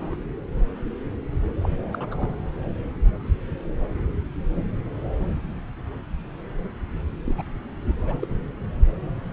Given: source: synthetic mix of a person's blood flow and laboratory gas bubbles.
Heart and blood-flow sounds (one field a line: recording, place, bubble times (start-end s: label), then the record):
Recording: Doppler ultrasound of blood flow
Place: subclavian vein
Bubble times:
0.00-0.16 s: bubbles
1.62-1.70 s: bubbles
1.91-2.34 s: bubbles
2.38-2.40 s: bubbles
7.24-7.34 s: bubbles
7.38-7.42 s: bubbles
7.98-8.28 s: bubbles
From the record:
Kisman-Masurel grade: 221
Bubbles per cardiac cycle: several, 3 to 8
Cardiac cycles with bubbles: 10 to 50%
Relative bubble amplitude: barely perceptible (0.100 to 0.250)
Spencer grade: 2 (many but less than half of the cardiac periods contain bubble signals, singularly or in groups)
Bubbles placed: anywhere in the cardiac cycle